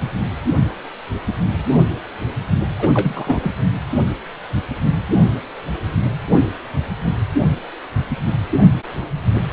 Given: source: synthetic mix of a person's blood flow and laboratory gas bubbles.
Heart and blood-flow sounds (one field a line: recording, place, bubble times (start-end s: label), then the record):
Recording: Doppler ultrasound of blood flow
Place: precordium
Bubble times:
2.79-2.89 s: bubbles
2.94-3.52 s: bubbles
From the record:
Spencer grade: 1 (occasional bubble signal discernible with the cardiac motion signal, with majority of cardiac periods free of bubbles)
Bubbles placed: anywhere in the cardiac cycle